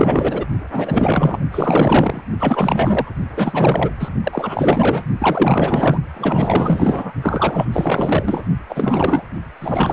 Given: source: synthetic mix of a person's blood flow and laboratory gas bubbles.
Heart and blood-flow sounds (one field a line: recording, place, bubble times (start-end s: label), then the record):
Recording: Doppler ultrasound of blood flow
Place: precordium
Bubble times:
0.00-0.45 s: bubbles
0.71-1.39 s: bubbles
1.51-2.21 s: bubbles
2.40-3.11 s: bubbles
3.36-3.90 s: bubbles
3.99-4.09 s: bubbles
4.24-5.04 s: bubbles
5.20-5.97 s: bubbles
6.14-7.14 s: bubbles
7.22-7.66 s: bubbles
7.72-8.43 s: bubbles
8.69-9.24 s: bubbles
9.61-9.93 s: bubbles
From the record:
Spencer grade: 4 (maximum detectable bubble signal sounding continuously throughout systole and diastole of every cardiac period, and overriding the amplitude of the normal cardiac signals)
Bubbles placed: only in the low amplitude regions of the cardiac cycle